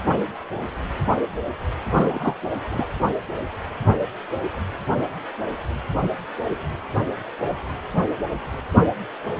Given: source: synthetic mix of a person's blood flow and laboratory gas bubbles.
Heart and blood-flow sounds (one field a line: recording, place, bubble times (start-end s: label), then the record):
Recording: Doppler ultrasound of blood flow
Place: precordium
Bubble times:
1.94-2.35 s: bubbles
2.71-2.87 s: bubbles
From the record:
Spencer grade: 1 (occasional bubble signal discernible with the cardiac motion signal, with majority of cardiac periods free of bubbles)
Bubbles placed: anywhere in the cardiac cycle